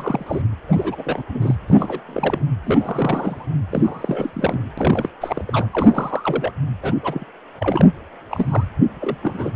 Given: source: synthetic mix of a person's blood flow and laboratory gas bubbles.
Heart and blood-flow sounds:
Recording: Doppler ultrasound of blood flow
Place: precordium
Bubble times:
0.00-0.42 s: bubbles
0.68-1.23 s: bubbles
1.28-1.55 s: bubbles
1.68-2.00 s: bubbles
2.06-2.46 s: bubbles
2.63-3.46 s: bubbles
3.69-4.30 s: bubbles
4.34-4.62 s: bubbles
4.78-5.09 s: bubbles
5.21-5.45 s: bubbles
5.47-5.66 s: bubbles
5.72-6.51 s: bubbles
6.82-6.94 s: bubbles
7.03-7.27 s: bubbles
7.59-7.92 s: bubbles
8.31-8.68 s: bubbles
9.00-9.17 s: bubbles
9.22-9.51 s: bubbles
From the record:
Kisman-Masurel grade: 342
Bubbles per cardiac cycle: rolling drumbeat, 9 or more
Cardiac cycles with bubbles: 100%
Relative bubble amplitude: moderate (0.250 to 0.450)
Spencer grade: 3 (all of the cardiac periods contain showers or single bubble signals, but not dominating or overriding the cardiac motion signals)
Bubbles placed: anywhere in the cardiac cycle

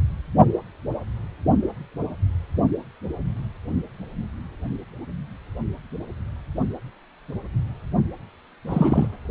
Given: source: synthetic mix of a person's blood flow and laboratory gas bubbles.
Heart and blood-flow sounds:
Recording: Doppler ultrasound of blood flow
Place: precordium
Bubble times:
8.67-9.07 s: bubbles
From the record:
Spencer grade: 1 (occasional bubble signal discernible with the cardiac motion signal, with majority of cardiac periods free of bubbles)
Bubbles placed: only in the low amplitude regions of the cardiac cycle

